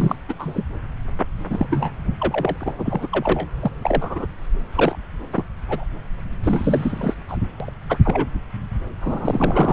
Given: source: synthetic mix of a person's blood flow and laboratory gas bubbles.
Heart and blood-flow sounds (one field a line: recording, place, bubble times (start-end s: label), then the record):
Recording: Doppler ultrasound of blood flow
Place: subclavian vein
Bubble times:
0.00-0.16 s: bubbles
0.29-0.34 s: bubbles
0.40-0.65 s: bubbles
1.50-1.67 s: bubbles
1.70-1.92 s: bubbles
2.19-2.57 s: bubbles
2.60-2.73 s: bubbles
2.78-3.08 s: bubbles
3.12-3.47 s: bubbles
3.60-3.71 s: bubbles
3.83-4.26 s: bubbles
4.75-4.96 s: bubbles
5.31-5.44 s: bubbles
5.70-5.83 s: bubbles
6.43-7.14 s: bubbles
7.28-7.38 s: bubbles
7.60-7.72 s: bubbles
7.89-7.98 s: bubbles
8.03-8.28 s: bubbles
9.01-9.72 s: bubbles
From the record:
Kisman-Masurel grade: 242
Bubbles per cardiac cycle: several, 3 to 8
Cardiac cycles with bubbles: 100%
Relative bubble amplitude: moderate (0.250 to 0.450)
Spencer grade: 3 (all of the cardiac periods contain showers or single bubble signals, but not dominating or overriding the cardiac motion signals)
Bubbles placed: anywhere in the cardiac cycle